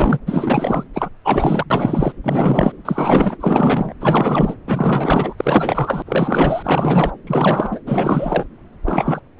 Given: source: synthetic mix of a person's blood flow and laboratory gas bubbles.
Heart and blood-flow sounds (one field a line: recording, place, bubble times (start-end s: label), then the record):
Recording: Doppler ultrasound of blood flow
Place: subclavian vein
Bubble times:
0.00-0.18 s: bubbles
0.26-0.84 s: bubbles
0.94-1.10 s: bubbles
1.24-1.65 s: bubbles
1.70-2.12 s: bubbles
2.23-2.72 s: bubbles
2.85-3.37 s: bubbles
3.40-3.93 s: bubbles
4.00-4.54 s: bubbles
4.67-5.34 s: bubbles
5.37-6.02 s: bubbles
6.06-7.12 s: bubbles
7.27-7.80 s: bubbles
7.87-8.46 s: bubbles
8.86-9.21 s: bubbles
9.38-9.40 s: bubbles
From the record:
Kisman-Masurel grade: 444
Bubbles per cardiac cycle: continuous sound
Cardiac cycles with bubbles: 100%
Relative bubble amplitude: maximal (0.775 to 0.999)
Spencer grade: 4 (maximum detectable bubble signal sounding continuously throughout systole and diastole of every cardiac period, and overriding the amplitude of the normal cardiac signals)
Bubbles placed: anywhere in the cardiac cycle